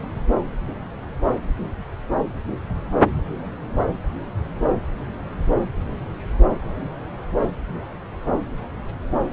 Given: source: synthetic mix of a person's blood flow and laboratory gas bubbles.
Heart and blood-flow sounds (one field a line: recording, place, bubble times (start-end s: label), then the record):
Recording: Doppler ultrasound of blood flow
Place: subclavian vein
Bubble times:
no bubbles
From the record:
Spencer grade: 0 (complete lack of bubble signals)